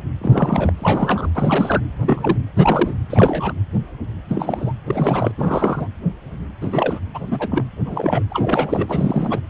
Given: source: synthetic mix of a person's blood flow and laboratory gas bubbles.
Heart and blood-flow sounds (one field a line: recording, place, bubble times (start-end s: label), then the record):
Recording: Doppler ultrasound of blood flow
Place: precordium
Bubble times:
0.21-0.72 s: bubbles
0.77-1.29 s: bubbles
1.35-1.83 s: bubbles
2.00-2.37 s: bubbles
2.56-2.95 s: bubbles
3.10-3.52 s: bubbles
4.28-4.72 s: bubbles
4.86-5.31 s: bubbles
5.38-5.88 s: bubbles
6.61-6.99 s: bubbles
7.14-7.22 s: bubbles
7.30-7.64 s: bubbles
7.85-8.22 s: bubbles
8.29-9.40 s: bubbles
From the record:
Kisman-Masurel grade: 232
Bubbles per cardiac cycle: several, 3 to 8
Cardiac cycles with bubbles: 50 to 99%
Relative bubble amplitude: moderate (0.250 to 0.450)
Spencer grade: 3 (all of the cardiac periods contain showers or single bubble signals, but not dominating or overriding the cardiac motion signals)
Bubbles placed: anywhere in the cardiac cycle